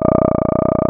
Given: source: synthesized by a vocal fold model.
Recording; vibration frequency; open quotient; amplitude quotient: sustained vowel; 30 Hz; 0.1; 1.1